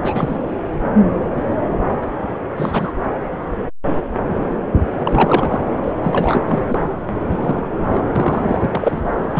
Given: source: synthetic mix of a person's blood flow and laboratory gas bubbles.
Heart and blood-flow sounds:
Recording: Doppler ultrasound of blood flow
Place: subclavian vein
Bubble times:
0.02-0.37 s: bubbles
2.56-2.92 s: bubbles
5.04-5.63 s: bubbles
5.83-5.92 s: bubbles
6.03-6.65 s: bubbles
6.68-6.83 s: bubbles
7.30-7.67 s: bubbles
7.92-8.03 s: bubbles
8.15-8.67 s: bubbles
8.72-9.01 s: bubbles
9.03-9.09 s: bubbles
9.22-9.40 s: bubbles
From the record:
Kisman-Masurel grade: 232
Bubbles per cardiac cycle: several, 3 to 8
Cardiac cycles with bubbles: 50 to 99%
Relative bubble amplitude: moderate (0.250 to 0.450)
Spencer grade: 3 (all of the cardiac periods contain showers or single bubble signals, but not dominating or overriding the cardiac motion signals)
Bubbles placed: anywhere in the cardiac cycle

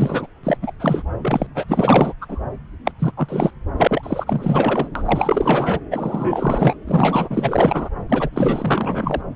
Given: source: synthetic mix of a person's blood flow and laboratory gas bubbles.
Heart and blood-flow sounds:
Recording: Doppler ultrasound of blood flow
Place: subclavian vein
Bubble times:
0.00-0.27 s: bubbles
0.43-0.57 s: bubbles
0.61-0.72 s: bubbles
0.79-1.03 s: bubbles
1.21-1.47 s: bubbles
1.54-1.66 s: bubbles
1.68-2.13 s: bubbles
2.21-2.40 s: bubbles
2.84-2.91 s: bubbles
2.98-3.12 s: bubbles
3.17-3.50 s: bubbles
3.77-4.89 s: bubbles
4.95-5.79 s: bubbles
5.91-6.76 s: bubbles
6.87-7.90 s: bubbles
8.09-8.29 s: bubbles
8.32-9.21 s: bubbles
From the record:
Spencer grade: 4 (maximum detectable bubble signal sounding continuously throughout systole and diastole of every cardiac period, and overriding the amplitude of the normal cardiac signals)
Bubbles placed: anywhere in the cardiac cycle

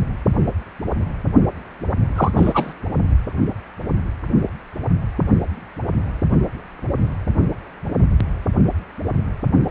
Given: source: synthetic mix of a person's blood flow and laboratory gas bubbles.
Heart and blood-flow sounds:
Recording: Doppler ultrasound of blood flow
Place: precordium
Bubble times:
2.15-2.31 s: bubbles
2.37-2.73 s: bubbles
From the record:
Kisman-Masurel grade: 212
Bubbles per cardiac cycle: several, 3 to 8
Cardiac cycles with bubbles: 1 to 10%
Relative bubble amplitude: moderate (0.250 to 0.450)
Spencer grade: 1 (occasional bubble signal discernible with the cardiac motion signal, with majority of cardiac periods free of bubbles)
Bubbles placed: only in the low amplitude regions of the cardiac cycle

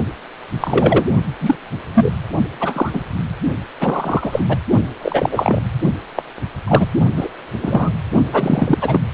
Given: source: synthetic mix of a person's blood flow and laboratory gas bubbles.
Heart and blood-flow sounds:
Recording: Doppler ultrasound of blood flow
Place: precordium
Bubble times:
0.60-1.06 s: bubbles
1.41-1.55 s: bubbles
1.94-2.10 s: bubbles
2.60-2.91 s: bubbles
2.93-3.02 s: bubbles
3.80-4.43 s: bubbles
4.48-4.56 s: bubbles
5.01-5.62 s: bubbles
6.17-6.22 s: bubbles
6.67-6.86 s: bubbles
7.17-7.28 s: bubbles
7.62-7.91 s: bubbles
8.33-8.78 s: bubbles
8.81-9.01 s: bubbles
From the record:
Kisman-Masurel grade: 243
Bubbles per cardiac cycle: several, 3 to 8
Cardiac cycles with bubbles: 100%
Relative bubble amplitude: loud (0.450 to 0.775)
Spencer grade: 3 (all of the cardiac periods contain showers or single bubble signals, but not dominating or overriding the cardiac motion signals)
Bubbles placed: only in the low amplitude regions of the cardiac cycle

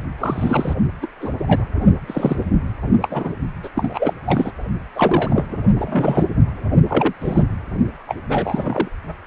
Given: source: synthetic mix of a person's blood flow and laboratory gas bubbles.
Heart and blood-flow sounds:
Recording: Doppler ultrasound of blood flow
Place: precordium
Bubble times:
0.18-0.73 s: bubbles
1.01-1.06 s: bubbles
1.20-1.32 s: bubbles
1.39-1.65 s: bubbles
2.07-2.36 s: bubbles
3.00-3.33 s: bubbles
3.63-3.70 s: bubbles
3.75-4.13 s: bubbles
4.25-4.52 s: bubbles
4.95-5.46 s: bubbles
5.49-5.57 s: bubbles
5.78-6.25 s: bubbles
6.88-7.13 s: bubbles
7.21-7.43 s: bubbles
8.07-8.15 s: bubbles
8.29-8.88 s: bubbles
From the record:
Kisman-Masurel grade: 243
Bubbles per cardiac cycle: several, 3 to 8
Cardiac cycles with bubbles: 100%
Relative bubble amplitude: loud (0.450 to 0.775)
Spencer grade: 3 (all of the cardiac periods contain showers or single bubble signals, but not dominating or overriding the cardiac motion signals)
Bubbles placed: only in the low amplitude regions of the cardiac cycle

